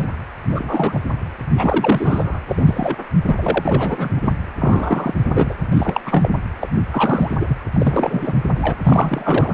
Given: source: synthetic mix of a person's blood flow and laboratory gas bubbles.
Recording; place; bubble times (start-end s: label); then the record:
Doppler ultrasound of blood flow; precordium
0.00-0.06 s: bubbles
0.52-0.99 s: bubbles
1.57-2.40 s: bubbles
2.48-2.96 s: bubbles
3.25-4.33 s: bubbles
4.59-5.14 s: bubbles
5.34-5.54 s: bubbles
5.71-6.01 s: bubbles
6.05-6.31 s: bubbles
6.61-6.69 s: bubbles
6.91-7.34 s: bubbles
7.40-7.58 s: bubbles
7.72-8.34 s: bubbles
8.55-8.77 s: bubbles
8.82-9.54 s: bubbles
From the record:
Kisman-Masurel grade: 343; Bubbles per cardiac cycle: rolling drumbeat, 9 or more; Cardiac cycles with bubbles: 100%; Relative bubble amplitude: loud (0.450 to 0.775); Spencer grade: 3 (all of the cardiac periods contain showers or single bubble signals, but not dominating or overriding the cardiac motion signals); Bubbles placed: anywhere in the cardiac cycle